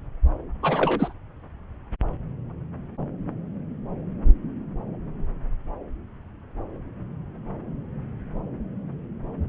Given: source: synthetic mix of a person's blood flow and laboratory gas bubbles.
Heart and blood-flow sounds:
Doppler ultrasound of blood flow; subclavian vein
0.62-1.14 s: bubbles
From the record:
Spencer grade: 1 (occasional bubble signal discernible with the cardiac motion signal, with majority of cardiac periods free of bubbles); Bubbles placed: anywhere in the cardiac cycle

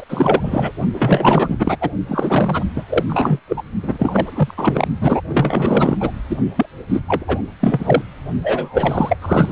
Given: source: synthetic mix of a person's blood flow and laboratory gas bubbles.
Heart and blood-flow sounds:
Doppler ultrasound of blood flow; precordium
0.00-0.04 s: bubbles
0.08-0.71 s: bubbles
0.92-1.76 s: bubbles
1.80-1.90 s: bubbles
2.08-2.63 s: bubbles
2.75-2.83 s: bubbles
2.89-3.04 s: bubbles
3.07-3.40 s: bubbles
3.47-3.63 s: bubbles
3.82-4.54 s: bubbles
4.57-4.88 s: bubbles
5.00-5.21 s: bubbles
5.29-5.96 s: bubbles
6.00-6.11 s: bubbles
6.29-6.36 s: bubbles
6.55-6.65 s: bubbles
6.88-7.01 s: bubbles
7.08-7.25 s: bubbles
7.27-7.42 s: bubbles
7.59-8.02 s: bubbles
8.43-9.18 s: bubbles
9.21-9.52 s: bubbles
From the record:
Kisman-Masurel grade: 444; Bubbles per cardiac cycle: continuous sound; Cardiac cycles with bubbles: 100%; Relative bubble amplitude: maximal (0.775 to 0.999); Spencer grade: 4 (maximum detectable bubble signal sounding continuously throughout systole and diastole of every cardiac period, and overriding the amplitude of the normal cardiac signals); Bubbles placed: only in the low amplitude regions of the cardiac cycle

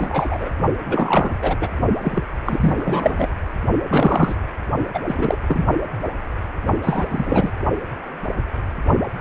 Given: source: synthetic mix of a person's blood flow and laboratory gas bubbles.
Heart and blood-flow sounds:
Doppler ultrasound of blood flow; precordium
0.00-0.49 s: bubbles
0.84-1.33 s: bubbles
1.42-1.56 s: bubbles
1.61-1.68 s: bubbles
2.01-2.23 s: bubbles
2.45-3.28 s: bubbles
3.89-4.35 s: bubbles
4.94-5.00 s: bubbles
5.07-5.38 s: bubbles
5.46-5.66 s: bubbles
6.83-7.53 s: bubbles
From the record:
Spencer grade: 3 (all of the cardiac periods contain showers or single bubble signals, but not dominating or overriding the cardiac motion signals); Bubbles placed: only in the low amplitude regions of the cardiac cycle

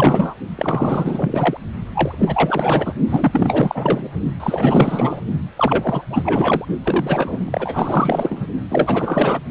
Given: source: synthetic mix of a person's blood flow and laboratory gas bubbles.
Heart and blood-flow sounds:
Doppler ultrasound of blood flow; precordium
0.00-0.35 s: bubbles
0.57-1.57 s: bubbles
1.93-2.93 s: bubbles
3.08-4.08 s: bubbles
4.39-5.20 s: bubbles
5.56-6.05 s: bubbles
6.10-6.65 s: bubbles
6.83-8.46 s: bubbles
8.70-9.40 s: bubbles
From the record:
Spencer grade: 4 (maximum detectable bubble signal sounding continuously throughout systole and diastole of every cardiac period, and overriding the amplitude of the normal cardiac signals); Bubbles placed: only in the low amplitude regions of the cardiac cycle

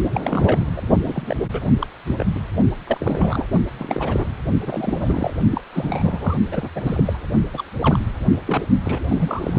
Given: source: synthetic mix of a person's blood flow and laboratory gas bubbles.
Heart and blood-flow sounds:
Doppler ultrasound of blood flow; precordium
0.14-0.21 s: bubbles
0.24-0.59 s: bubbles
0.76-0.82 s: bubbles
1.05-1.36 s: bubbles
1.52-1.60 s: bubbles
1.79-1.86 s: bubbles
2.06-2.15 s: bubbles
2.18-2.25 s: bubbles
2.35-2.40 s: bubbles
2.87-2.98 s: bubbles
3.00-3.46 s: bubbles
3.78-4.34 s: bubbles
4.60-5.33 s: bubbles
5.50-5.61 s: bubbles
5.72-6.37 s: bubbles
6.51-6.69 s: bubbles
6.75-7.25 s: bubbles
7.54-7.63 s: bubbles
7.80-8.03 s: bubbles
8.31-8.40 s: bubbles
8.46-8.62 s: bubbles
8.85-9.00 s: bubbles
9.08-9.59 s: bubbles
From the record:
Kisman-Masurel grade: 342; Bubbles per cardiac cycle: rolling drumbeat, 9 or more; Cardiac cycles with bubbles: 100%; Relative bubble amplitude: moderate (0.250 to 0.450); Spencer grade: 3 (all of the cardiac periods contain showers or single bubble signals, but not dominating or overriding the cardiac motion signals); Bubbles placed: only in the low amplitude regions of the cardiac cycle

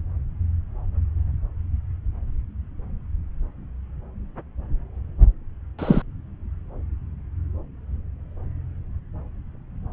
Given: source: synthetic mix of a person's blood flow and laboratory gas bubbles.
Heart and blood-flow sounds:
Doppler ultrasound of blood flow; subclavian vein
5.79-6.02 s: bubbles
From the record:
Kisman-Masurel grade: 123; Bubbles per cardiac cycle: 1 to 2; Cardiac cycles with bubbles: 10 to 50%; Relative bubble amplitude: loud (0.450 to 0.775); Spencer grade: 2 (many but less than half of the cardiac periods contain bubble signals, singularly or in groups); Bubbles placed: anywhere in the cardiac cycle

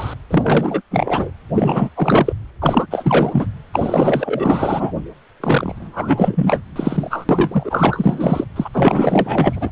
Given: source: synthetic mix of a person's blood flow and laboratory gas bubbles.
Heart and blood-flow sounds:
Doppler ultrasound of blood flow; precordium
0.00-0.14 s: bubbles
0.29-0.81 s: bubbles
0.91-1.30 s: bubbles
1.54-1.89 s: bubbles
1.96-2.33 s: bubbles
2.61-2.87 s: bubbles
2.91-3.46 s: bubbles
3.72-4.93 s: bubbles
5.40-6.60 s: bubbles
6.75-7.25 s: bubbles
7.29-8.45 s: bubbles
8.56-8.69 s: bubbles
8.73-9.71 s: bubbles
From the record:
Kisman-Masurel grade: 444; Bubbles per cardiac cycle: continuous sound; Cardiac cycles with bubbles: 100%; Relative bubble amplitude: maximal (0.775 to 0.999); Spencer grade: 4 (maximum detectable bubble signal sounding continuously throughout systole and diastole of every cardiac period, and overriding the amplitude of the normal cardiac signals); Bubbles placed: anywhere in the cardiac cycle

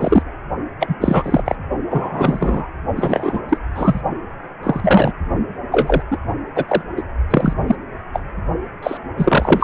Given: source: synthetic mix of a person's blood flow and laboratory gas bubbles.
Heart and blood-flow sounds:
Doppler ultrasound of blood flow; precordium
0.00-0.22 s: bubbles
0.80-0.95 s: bubbles
1.00-1.42 s: bubbles
1.45-1.55 s: bubbles
1.90-2.67 s: bubbles
2.96-3.40 s: bubbles
3.48-3.58 s: bubbles
3.75-4.01 s: bubbles
4.63-5.12 s: bubbles
5.72-6.02 s: bubbles
6.11-6.18 s: bubbles
6.56-6.65 s: bubbles
6.68-6.82 s: bubbles
6.97-7.03 s: bubbles
7.30-7.53 s: bubbles
7.67-7.75 s: bubbles
8.13-8.21 s: bubbles
8.82-8.97 s: bubbles
9.16-9.64 s: bubbles
From the record:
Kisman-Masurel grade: 243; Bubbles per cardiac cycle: several, 3 to 8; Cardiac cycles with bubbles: 100%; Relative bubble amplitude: loud (0.450 to 0.775); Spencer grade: 3 (all of the cardiac periods contain showers or single bubble signals, but not dominating or overriding the cardiac motion signals); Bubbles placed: only in the low amplitude regions of the cardiac cycle

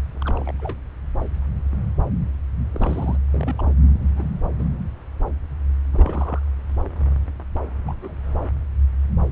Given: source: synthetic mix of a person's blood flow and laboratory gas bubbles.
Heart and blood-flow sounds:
Doppler ultrasound of blood flow; subclavian vein
0.14-0.52 s: bubbles
0.59-0.75 s: bubbles
2.74-3.17 s: bubbles
3.33-3.56 s: bubbles
3.58-3.73 s: bubbles
4.00-4.04 s: bubbles
4.14-4.29 s: bubbles
4.59-4.65 s: bubbles
5.93-6.39 s: bubbles
7.85-7.94 s: bubbles
8.02-8.20 s: bubbles
From the record:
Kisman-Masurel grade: 221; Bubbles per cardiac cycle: several, 3 to 8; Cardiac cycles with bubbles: 10 to 50%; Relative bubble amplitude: barely perceptible (0.100 to 0.250); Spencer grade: 2 (many but less than half of the cardiac periods contain bubble signals, singularly or in groups); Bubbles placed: anywhere in the cardiac cycle

